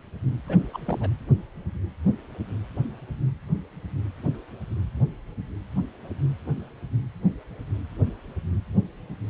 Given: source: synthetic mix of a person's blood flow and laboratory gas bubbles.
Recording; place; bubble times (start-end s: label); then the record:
Doppler ultrasound of blood flow; precordium
0.47-0.58 s: bubbles
0.73-0.78 s: bubbles
0.86-1.09 s: bubbles
From the record:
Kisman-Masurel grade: 212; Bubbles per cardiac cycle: several, 3 to 8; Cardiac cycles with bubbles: 1 to 10%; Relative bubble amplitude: moderate (0.250 to 0.450); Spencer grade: 1 (occasional bubble signal discernible with the cardiac motion signal, with majority of cardiac periods free of bubbles); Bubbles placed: anywhere in the cardiac cycle